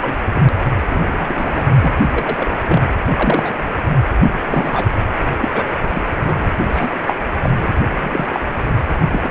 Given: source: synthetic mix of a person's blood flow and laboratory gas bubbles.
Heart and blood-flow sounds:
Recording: Doppler ultrasound of blood flow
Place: precordium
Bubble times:
0.02-0.19 s: bubbles
0.28-0.46 s: bubbles
0.87-1.64 s: bubbles
1.82-1.94 s: bubbles
2.12-2.51 s: bubbles
2.63-2.83 s: bubbles
3.16-3.55 s: bubbles
4.22-4.86 s: bubbles
5.40-5.48 s: bubbles
5.53-5.65 s: bubbles
5.90-6.04 s: bubbles
6.18-6.52 s: bubbles
6.72-6.90 s: bubbles
7.05-7.13 s: bubbles
7.42-7.54 s: bubbles
7.59-7.74 s: bubbles
7.98-8.27 s: bubbles
8.32-8.40 s: bubbles
9.12-9.21 s: bubbles
9.24-9.29 s: bubbles
From the record:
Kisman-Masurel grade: 242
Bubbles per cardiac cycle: several, 3 to 8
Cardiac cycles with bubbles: 100%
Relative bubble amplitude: moderate (0.250 to 0.450)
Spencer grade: 3 (all of the cardiac periods contain showers or single bubble signals, but not dominating or overriding the cardiac motion signals)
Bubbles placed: anywhere in the cardiac cycle

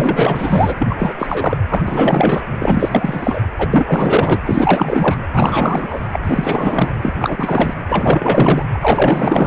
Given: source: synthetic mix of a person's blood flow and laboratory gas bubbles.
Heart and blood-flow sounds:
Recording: Doppler ultrasound of blood flow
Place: precordium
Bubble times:
0.00-0.76 s: bubbles
0.79-1.15 s: bubbles
1.19-1.58 s: bubbles
1.69-2.43 s: bubbles
2.60-3.41 s: bubbles
3.58-3.69 s: bubbles
3.71-4.41 s: bubbles
4.46-5.19 s: bubbles
5.32-6.01 s: bubbles
6.12-6.20 s: bubbles
6.23-6.96 s: bubbles
7.01-7.13 s: bubbles
7.19-7.74 s: bubbles
7.89-8.65 s: bubbles
8.74-9.46 s: bubbles
From the record:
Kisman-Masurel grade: 444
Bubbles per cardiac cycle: continuous sound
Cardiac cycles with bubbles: 100%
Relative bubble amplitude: maximal (0.775 to 0.999)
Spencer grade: 4 (maximum detectable bubble signal sounding continuously throughout systole and diastole of every cardiac period, and overriding the amplitude of the normal cardiac signals)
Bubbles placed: anywhere in the cardiac cycle

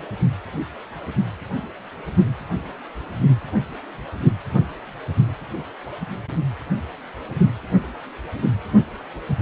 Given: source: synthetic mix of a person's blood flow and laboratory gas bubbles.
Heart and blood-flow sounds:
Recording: Doppler ultrasound of blood flow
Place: precordium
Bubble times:
no bubbles
From the record:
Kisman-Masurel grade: 000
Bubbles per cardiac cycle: 0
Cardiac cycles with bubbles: 0%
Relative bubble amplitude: no bubbles discernible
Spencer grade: 0 (complete lack of bubble signals)

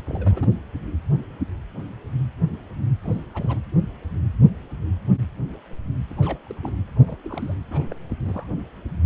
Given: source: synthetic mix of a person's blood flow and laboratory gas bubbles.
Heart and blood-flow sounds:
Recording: Doppler ultrasound of blood flow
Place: precordium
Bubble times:
0.07-0.47 s: bubbles
3.02-3.23 s: bubbles
3.34-3.58 s: bubbles
6.09-6.13 s: bubbles
6.17-6.38 s: bubbles
6.46-6.71 s: bubbles
6.96-7.17 s: bubbles
7.24-7.54 s: bubbles
7.71-7.95 s: bubbles
8.10-8.15 s: bubbles
8.23-8.46 s: bubbles
From the record:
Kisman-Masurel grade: 221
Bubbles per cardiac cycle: several, 3 to 8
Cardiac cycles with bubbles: 10 to 50%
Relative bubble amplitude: barely perceptible (0.100 to 0.250)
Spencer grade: 2 (many but less than half of the cardiac periods contain bubble signals, singularly or in groups)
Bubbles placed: anywhere in the cardiac cycle

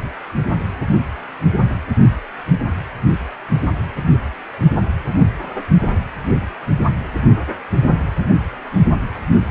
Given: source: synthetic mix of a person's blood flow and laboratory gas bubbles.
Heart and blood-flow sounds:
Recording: Doppler ultrasound of blood flow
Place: precordium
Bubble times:
9.14-9.21 s: bubbles
9.38-9.46 s: bubbles
From the record:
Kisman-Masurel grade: 211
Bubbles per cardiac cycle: several, 3 to 8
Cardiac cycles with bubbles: 1 to 10%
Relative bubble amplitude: barely perceptible (0.100 to 0.250)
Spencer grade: 1 (occasional bubble signal discernible with the cardiac motion signal, with majority of cardiac periods free of bubbles)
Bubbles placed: only in the low amplitude regions of the cardiac cycle

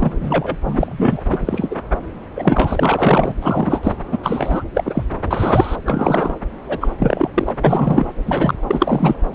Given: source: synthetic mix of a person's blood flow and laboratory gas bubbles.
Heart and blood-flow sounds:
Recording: Doppler ultrasound of blood flow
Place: subclavian vein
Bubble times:
0.00-0.56 s: bubbles
0.66-1.22 s: bubbles
1.28-1.75 s: bubbles
2.36-3.34 s: bubbles
3.41-3.93 s: bubbles
4.11-4.18 s: bubbles
4.23-4.63 s: bubbles
4.74-5.03 s: bubbles
5.30-5.76 s: bubbles
5.85-6.35 s: bubbles
6.68-6.78 s: bubbles
6.80-6.88 s: bubbles
6.99-7.29 s: bubbles
7.34-7.54 s: bubbles
7.65-8.07 s: bubbles
8.27-8.54 s: bubbles
8.69-9.16 s: bubbles
9.33-9.35 s: bubbles
From the record:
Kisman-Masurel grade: 243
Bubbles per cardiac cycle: several, 3 to 8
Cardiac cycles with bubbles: 100%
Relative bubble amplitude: loud (0.450 to 0.775)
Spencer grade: 3 (all of the cardiac periods contain showers or single bubble signals, but not dominating or overriding the cardiac motion signals)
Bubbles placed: anywhere in the cardiac cycle

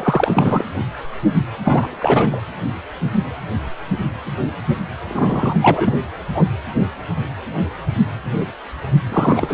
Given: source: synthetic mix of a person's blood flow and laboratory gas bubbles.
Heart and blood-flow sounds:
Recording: Doppler ultrasound of blood flow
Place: precordium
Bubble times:
0.00-0.64 s: bubbles
1.64-2.41 s: bubbles
5.09-5.58 s: bubbles
5.62-6.00 s: bubbles
6.34-6.45 s: bubbles
9.10-9.54 s: bubbles
From the record:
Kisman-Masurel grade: 333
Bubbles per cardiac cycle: rolling drumbeat, 9 or more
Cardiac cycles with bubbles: 50 to 99%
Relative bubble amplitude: loud (0.450 to 0.775)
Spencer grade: 3 (all of the cardiac periods contain showers or single bubble signals, but not dominating or overriding the cardiac motion signals)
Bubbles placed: anywhere in the cardiac cycle

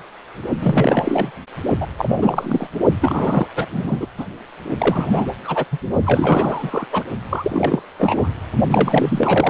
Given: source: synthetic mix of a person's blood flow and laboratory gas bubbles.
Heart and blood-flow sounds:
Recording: Doppler ultrasound of blood flow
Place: precordium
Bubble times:
0.61-1.30 s: bubbles
1.80-1.86 s: bubbles
1.98-2.67 s: bubbles
3.01-3.47 s: bubbles
3.55-3.66 s: bubbles
3.70-4.06 s: bubbles
4.17-4.25 s: bubbles
4.78-5.26 s: bubbles
5.45-5.65 s: bubbles
5.71-5.78 s: bubbles
6.06-6.87 s: bubbles
6.92-7.04 s: bubbles
7.31-7.83 s: bubbles
7.99-8.29 s: bubbles
8.70-9.50 s: bubbles
From the record:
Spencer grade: 3 (all of the cardiac periods contain showers or single bubble signals, but not dominating or overriding the cardiac motion signals)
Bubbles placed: only in the low amplitude regions of the cardiac cycle

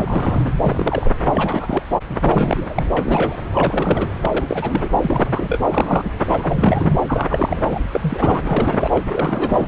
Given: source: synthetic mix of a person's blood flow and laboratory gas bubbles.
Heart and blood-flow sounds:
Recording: Doppler ultrasound of blood flow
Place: subclavian vein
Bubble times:
0.00-0.53 s: bubbles
0.63-1.15 s: bubbles
1.25-1.83 s: bubbles
2.10-2.16 s: bubbles
2.20-2.84 s: bubbles
2.97-3.37 s: bubbles
3.54-4.10 s: bubbles
4.22-4.88 s: bubbles
4.99-5.59 s: bubbles
5.64-6.11 s: bubbles
6.27-6.94 s: bubbles
7.07-7.62 s: bubbles
7.67-7.80 s: bubbles
7.92-8.42 s: bubbles
8.45-9.03 s: bubbles
9.08-9.67 s: bubbles
From the record:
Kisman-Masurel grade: 342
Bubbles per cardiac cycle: rolling drumbeat, 9 or more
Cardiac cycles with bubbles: 100%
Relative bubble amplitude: moderate (0.250 to 0.450)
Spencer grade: 3 (all of the cardiac periods contain showers or single bubble signals, but not dominating or overriding the cardiac motion signals)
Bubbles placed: anywhere in the cardiac cycle

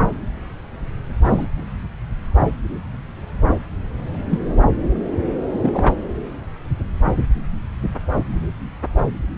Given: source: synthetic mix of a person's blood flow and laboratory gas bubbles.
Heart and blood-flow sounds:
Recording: Doppler ultrasound of blood flow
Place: subclavian vein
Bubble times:
1.24-1.47 s: bubbles
4.29-4.39 s: bubbles
5.51-5.95 s: bubbles
From the record:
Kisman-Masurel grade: 123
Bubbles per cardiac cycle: 1 to 2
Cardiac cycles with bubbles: 10 to 50%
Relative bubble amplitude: loud (0.450 to 0.775)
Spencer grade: 2 (many but less than half of the cardiac periods contain bubble signals, singularly or in groups)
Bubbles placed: anywhere in the cardiac cycle

